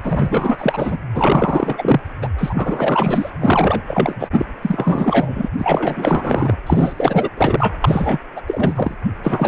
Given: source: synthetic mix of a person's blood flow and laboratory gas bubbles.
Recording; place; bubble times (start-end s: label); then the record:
Doppler ultrasound of blood flow; precordium
0.03-0.98 s: bubbles
1.14-2.01 s: bubbles
2.21-2.30 s: bubbles
2.38-3.30 s: bubbles
3.40-3.84 s: bubbles
3.88-4.28 s: bubbles
4.32-4.45 s: bubbles
4.62-5.49 s: bubbles
5.58-6.56 s: bubbles
6.66-7.29 s: bubbles
7.37-7.75 s: bubbles
7.82-8.18 s: bubbles
8.36-8.42 s: bubbles
8.47-8.95 s: bubbles
9.23-9.48 s: bubbles
From the record:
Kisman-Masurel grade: 444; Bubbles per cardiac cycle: continuous sound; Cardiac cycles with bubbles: 100%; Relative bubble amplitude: maximal (0.775 to 0.999); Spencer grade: 4 (maximum detectable bubble signal sounding continuously throughout systole and diastole of every cardiac period, and overriding the amplitude of the normal cardiac signals); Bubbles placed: anywhere in the cardiac cycle